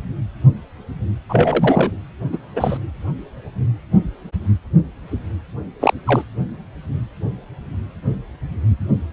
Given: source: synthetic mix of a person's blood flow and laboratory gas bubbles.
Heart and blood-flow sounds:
Doppler ultrasound of blood flow; precordium
1.29-1.92 s: bubbles
2.32-2.38 s: bubbles
2.55-2.77 s: bubbles
5.79-5.94 s: bubbles
6.06-6.23 s: bubbles
From the record:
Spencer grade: 2 (many but less than half of the cardiac periods contain bubble signals, singularly or in groups); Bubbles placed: anywhere in the cardiac cycle

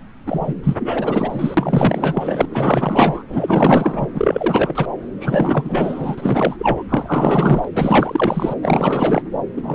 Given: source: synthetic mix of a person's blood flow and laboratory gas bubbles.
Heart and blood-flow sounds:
Doppler ultrasound of blood flow; subclavian vein
0.26-0.54 s: bubbles
0.63-0.76 s: bubbles
0.79-1.54 s: bubbles
1.57-2.46 s: bubbles
2.50-3.23 s: bubbles
3.29-4.07 s: bubbles
4.14-4.86 s: bubbles
5.20-6.83 s: bubbles
6.89-7.65 s: bubbles
7.75-8.55 s: bubbles
8.62-9.23 s: bubbles
9.56-9.75 s: bubbles
From the record:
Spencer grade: 4 (maximum detectable bubble signal sounding continuously throughout systole and diastole of every cardiac period, and overriding the amplitude of the normal cardiac signals); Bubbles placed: anywhere in the cardiac cycle

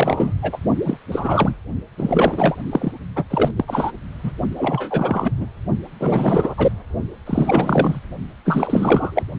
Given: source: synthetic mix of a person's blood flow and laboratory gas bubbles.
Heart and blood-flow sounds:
Doppler ultrasound of blood flow; precordium
0.00-0.34 s: bubbles
0.42-0.58 s: bubbles
0.86-0.97 s: bubbles
1.12-1.57 s: bubbles
1.98-2.56 s: bubbles
2.72-2.92 s: bubbles
3.16-3.24 s: bubbles
3.30-3.51 s: bubbles
3.56-3.65 s: bubbles
3.68-3.91 s: bubbles
4.23-4.31 s: bubbles
4.57-5.32 s: bubbles
5.37-5.46 s: bubbles
6.00-6.54 s: bubbles
6.57-6.71 s: bubbles
7.26-8.00 s: bubbles
8.45-9.23 s: bubbles
From the record:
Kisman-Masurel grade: 342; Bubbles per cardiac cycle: rolling drumbeat, 9 or more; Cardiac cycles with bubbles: 100%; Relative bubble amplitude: moderate (0.250 to 0.450); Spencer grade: 3 (all of the cardiac periods contain showers or single bubble signals, but not dominating or overriding the cardiac motion signals); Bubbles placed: only in the low amplitude regions of the cardiac cycle

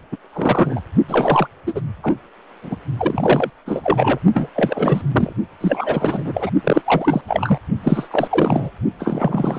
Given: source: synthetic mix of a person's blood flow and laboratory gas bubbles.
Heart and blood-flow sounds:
Doppler ultrasound of blood flow; precordium
0.11-0.16 s: bubbles
0.33-0.80 s: bubbles
1.08-1.48 s: bubbles
1.67-1.80 s: bubbles
2.02-2.14 s: bubbles
2.62-2.76 s: bubbles
2.97-3.50 s: bubbles
3.65-4.19 s: bubbles
4.33-4.50 s: bubbles
4.55-5.01 s: bubbles
5.12-5.33 s: bubbles
5.60-6.50 s: bubbles
6.63-7.21 s: bubbles
7.27-7.58 s: bubbles
7.83-8.71 s: bubbles
8.99-9.59 s: bubbles
From the record:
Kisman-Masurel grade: 343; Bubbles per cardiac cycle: rolling drumbeat, 9 or more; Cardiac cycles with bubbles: 100%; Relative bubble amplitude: loud (0.450 to 0.775); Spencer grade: 3 (all of the cardiac periods contain showers or single bubble signals, but not dominating or overriding the cardiac motion signals); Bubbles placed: only in the low amplitude regions of the cardiac cycle

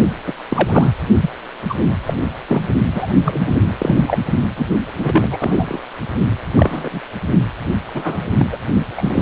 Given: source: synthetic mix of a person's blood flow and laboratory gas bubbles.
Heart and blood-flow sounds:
Doppler ultrasound of blood flow; precordium
0.26-0.33 s: bubbles
0.50-0.91 s: bubbles
1.21-1.30 s: bubbles
1.69-1.75 s: bubbles
2.06-2.14 s: bubbles
2.48-2.62 s: bubbles
2.93-3.12 s: bubbles
3.25-3.54 s: bubbles
3.78-4.03 s: bubbles
4.08-4.18 s: bubbles
4.57-4.66 s: bubbles
4.94-5.28 s: bubbles
5.31-5.79 s: bubbles
6.55-7.01 s: bubbles
7.94-8.24 s: bubbles
8.38-8.46 s: bubbles
8.52-8.57 s: bubbles
8.96-9.22 s: bubbles
From the record:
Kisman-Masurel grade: 242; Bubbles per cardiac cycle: several, 3 to 8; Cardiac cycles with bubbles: 100%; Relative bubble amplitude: moderate (0.250 to 0.450); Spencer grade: 3 (all of the cardiac periods contain showers or single bubble signals, but not dominating or overriding the cardiac motion signals); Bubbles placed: only in the low amplitude regions of the cardiac cycle

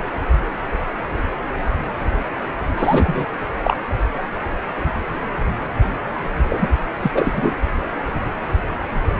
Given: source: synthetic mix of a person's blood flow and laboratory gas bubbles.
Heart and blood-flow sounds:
Doppler ultrasound of blood flow; precordium
2.78-3.26 s: bubbles
3.64-3.78 s: bubbles
6.50-6.68 s: bubbles
7.02-7.11 s: bubbles
7.14-7.54 s: bubbles
From the record:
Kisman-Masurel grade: 223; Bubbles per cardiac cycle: several, 3 to 8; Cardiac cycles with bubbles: 10 to 50%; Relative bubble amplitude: loud (0.450 to 0.775); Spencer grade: 2 (many but less than half of the cardiac periods contain bubble signals, singularly or in groups); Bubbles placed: anywhere in the cardiac cycle

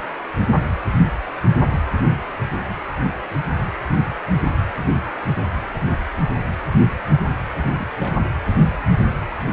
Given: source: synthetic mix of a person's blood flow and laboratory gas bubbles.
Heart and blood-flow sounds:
Doppler ultrasound of blood flow; precordium
7.64-7.87 s: bubbles
7.99-8.13 s: bubbles
From the record:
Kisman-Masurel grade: 111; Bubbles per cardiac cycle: 1 to 2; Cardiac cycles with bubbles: 1 to 10%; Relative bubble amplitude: barely perceptible (0.100 to 0.250); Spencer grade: 1 (occasional bubble signal discernible with the cardiac motion signal, with majority of cardiac periods free of bubbles); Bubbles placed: anywhere in the cardiac cycle

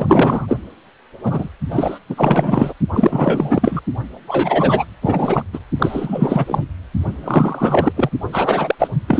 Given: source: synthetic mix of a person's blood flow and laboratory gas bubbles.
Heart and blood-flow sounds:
Doppler ultrasound of blood flow; precordium
0.00-0.59 s: bubbles
1.22-1.49 s: bubbles
1.70-1.99 s: bubbles
2.09-2.73 s: bubbles
2.93-3.81 s: bubbles
4.27-4.84 s: bubbles
5.02-5.44 s: bubbles
5.53-5.59 s: bubbles
5.79-6.65 s: bubbles
7.23-7.93 s: bubbles
7.96-8.10 s: bubbles
8.32-8.75 s: bubbles
8.79-8.88 s: bubbles
9.07-9.19 s: bubbles
From the record:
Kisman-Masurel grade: 444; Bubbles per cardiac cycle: continuous sound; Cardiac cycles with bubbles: 100%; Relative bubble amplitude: maximal (0.775 to 0.999); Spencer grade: 4 (maximum detectable bubble signal sounding continuously throughout systole and diastole of every cardiac period, and overriding the amplitude of the normal cardiac signals); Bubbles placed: only in the low amplitude regions of the cardiac cycle

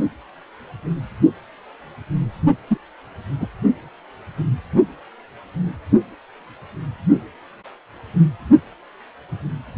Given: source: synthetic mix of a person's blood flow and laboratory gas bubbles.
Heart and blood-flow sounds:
Doppler ultrasound of blood flow; precordium
2.67-2.77 s: bubbles
3.40-3.48 s: bubbles
From the record:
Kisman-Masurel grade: 112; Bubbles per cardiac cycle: 1 to 2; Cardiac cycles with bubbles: 1 to 10%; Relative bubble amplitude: moderate (0.250 to 0.450); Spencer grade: 1 (occasional bubble signal discernible with the cardiac motion signal, with majority of cardiac periods free of bubbles); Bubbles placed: only in the low amplitude regions of the cardiac cycle

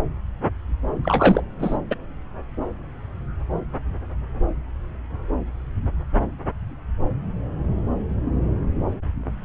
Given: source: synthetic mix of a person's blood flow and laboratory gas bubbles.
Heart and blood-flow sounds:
Doppler ultrasound of blood flow; subclavian vein
1.03-1.42 s: bubbles
1.59-1.77 s: bubbles
1.91-1.96 s: bubbles
From the record:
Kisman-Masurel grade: 222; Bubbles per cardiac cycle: several, 3 to 8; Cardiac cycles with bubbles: 10 to 50%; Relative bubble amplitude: moderate (0.250 to 0.450); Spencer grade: 2 (many but less than half of the cardiac periods contain bubble signals, singularly or in groups); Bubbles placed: anywhere in the cardiac cycle

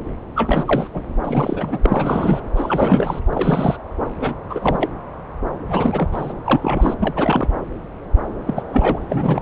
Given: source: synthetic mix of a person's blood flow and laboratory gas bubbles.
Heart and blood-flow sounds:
Doppler ultrasound of blood flow; subclavian vein
0.35-0.89 s: bubbles
0.94-1.02 s: bubbles
1.23-1.79 s: bubbles
1.83-2.40 s: bubbles
2.56-3.21 s: bubbles
3.33-3.77 s: bubbles
4.20-4.34 s: bubbles
4.49-4.90 s: bubbles
5.68-6.33 s: bubbles
6.45-6.94 s: bubbles
7.00-7.46 s: bubbles
8.46-8.62 s: bubbles
8.70-8.99 s: bubbles
9.08-9.42 s: bubbles
From the record:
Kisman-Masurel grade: 332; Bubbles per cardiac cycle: rolling drumbeat, 9 or more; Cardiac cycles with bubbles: 50 to 99%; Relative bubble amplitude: moderate (0.250 to 0.450); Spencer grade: 3 (all of the cardiac periods contain showers or single bubble signals, but not dominating or overriding the cardiac motion signals); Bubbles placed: anywhere in the cardiac cycle

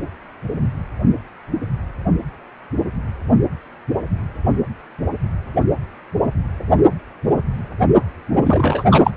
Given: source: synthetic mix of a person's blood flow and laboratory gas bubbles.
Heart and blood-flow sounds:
Doppler ultrasound of blood flow; precordium
8.44-9.11 s: bubbles
From the record:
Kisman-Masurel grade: 223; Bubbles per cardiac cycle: several, 3 to 8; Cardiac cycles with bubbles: 10 to 50%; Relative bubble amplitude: loud (0.450 to 0.775); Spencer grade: 2 (many but less than half of the cardiac periods contain bubble signals, singularly or in groups); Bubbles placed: only in the low amplitude regions of the cardiac cycle

